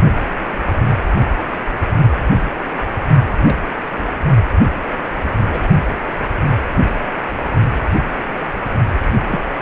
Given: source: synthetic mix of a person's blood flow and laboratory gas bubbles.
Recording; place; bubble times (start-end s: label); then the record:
Doppler ultrasound of blood flow; precordium
3.42-3.56 s: bubbles
3.96-4.04 s: bubbles
5.50-5.67 s: bubbles
9.29-9.39 s: bubbles
From the record:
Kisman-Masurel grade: 121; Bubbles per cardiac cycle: 1 to 2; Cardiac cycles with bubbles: 10 to 50%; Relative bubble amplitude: barely perceptible (0.100 to 0.250); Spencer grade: 2 (many but less than half of the cardiac periods contain bubble signals, singularly or in groups); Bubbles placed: only in the low amplitude regions of the cardiac cycle